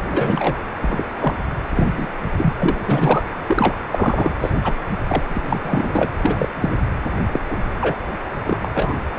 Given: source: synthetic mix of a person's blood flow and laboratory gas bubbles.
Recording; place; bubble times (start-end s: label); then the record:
Doppler ultrasound of blood flow; precordium
0.09-0.55 s: bubbles
0.81-1.04 s: bubbles
1.19-1.38 s: bubbles
1.74-1.88 s: bubbles
1.97-2.08 s: bubbles
2.37-2.54 s: bubbles
2.60-2.76 s: bubbles
2.85-3.25 s: bubbles
3.47-3.74 s: bubbles
3.91-4.31 s: bubbles
4.39-4.50 s: bubbles
4.63-4.73 s: bubbles
5.08-5.23 s: bubbles
5.29-6.10 s: bubbles
6.19-6.50 s: bubbles
6.55-6.77 s: bubbles
7.33-7.39 s: bubbles
7.50-7.57 s: bubbles
7.80-7.96 s: bubbles
8.46-8.59 s: bubbles
8.64-8.69 s: bubbles
8.74-8.94 s: bubbles
From the record:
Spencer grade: 3 (all of the cardiac periods contain showers or single bubble signals, but not dominating or overriding the cardiac motion signals); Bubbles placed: anywhere in the cardiac cycle